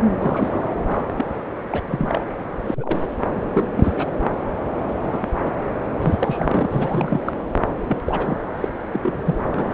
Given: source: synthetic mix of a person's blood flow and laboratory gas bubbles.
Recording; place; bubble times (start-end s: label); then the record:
Doppler ultrasound of blood flow; subclavian vein
0.19-0.70 s: bubbles
0.87-1.03 s: bubbles
1.17-1.27 s: bubbles
1.70-1.82 s: bubbles
1.86-2.21 s: bubbles
2.67-2.99 s: bubbles
3.52-3.67 s: bubbles
3.75-3.93 s: bubbles
3.96-4.06 s: bubbles
4.88-4.95 s: bubbles
5.00-5.27 s: bubbles
5.43-5.52 s: bubbles
6.01-6.67 s: bubbles
6.70-7.33 s: bubbles
7.88-7.98 s: bubbles
8.05-8.39 s: bubbles
8.57-8.69 s: bubbles
8.93-9.00 s: bubbles
9.03-9.23 s: bubbles
9.25-9.35 s: bubbles
9.50-9.74 s: bubbles
From the record:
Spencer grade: 3 (all of the cardiac periods contain showers or single bubble signals, but not dominating or overriding the cardiac motion signals); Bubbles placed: anywhere in the cardiac cycle